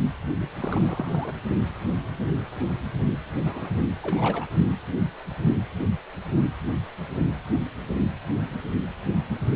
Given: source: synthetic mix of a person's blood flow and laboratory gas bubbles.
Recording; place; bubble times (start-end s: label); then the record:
Doppler ultrasound of blood flow; precordium
0.39-0.49 s: bubbles
0.60-1.32 s: bubbles
3.42-3.74 s: bubbles
4.02-4.46 s: bubbles
From the record:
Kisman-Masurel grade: 221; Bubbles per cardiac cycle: several, 3 to 8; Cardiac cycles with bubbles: 10 to 50%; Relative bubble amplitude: barely perceptible (0.100 to 0.250); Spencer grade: 2 (many but less than half of the cardiac periods contain bubble signals, singularly or in groups); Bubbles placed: only in the low amplitude regions of the cardiac cycle